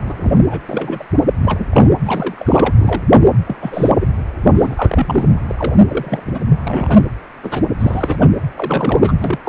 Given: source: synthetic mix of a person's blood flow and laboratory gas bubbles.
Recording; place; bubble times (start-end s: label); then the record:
Doppler ultrasound of blood flow; precordium
0.05-0.15 s: bubbles
0.20-0.66 s: bubbles
0.68-1.05 s: bubbles
1.42-1.67 s: bubbles
1.71-1.90 s: bubbles
2.05-2.73 s: bubbles
2.77-3.02 s: bubbles
3.24-3.32 s: bubbles
3.46-3.56 s: bubbles
3.61-3.90 s: bubbles
3.99-4.07 s: bubbles
4.44-4.51 s: bubbles
4.54-5.36 s: bubbles
5.49-5.74 s: bubbles
5.88-6.23 s: bubbles
6.26-6.40 s: bubbles
6.64-7.04 s: bubbles
7.43-7.62 s: bubbles
7.79-8.17 s: bubbles
8.20-8.28 s: bubbles
8.54-9.12 s: bubbles
9.21-9.38 s: bubbles
9.44-9.49 s: bubbles
From the record:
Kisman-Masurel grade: 242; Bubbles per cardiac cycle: several, 3 to 8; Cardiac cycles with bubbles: 100%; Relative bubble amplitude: moderate (0.250 to 0.450); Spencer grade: 3 (all of the cardiac periods contain showers or single bubble signals, but not dominating or overriding the cardiac motion signals); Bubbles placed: anywhere in the cardiac cycle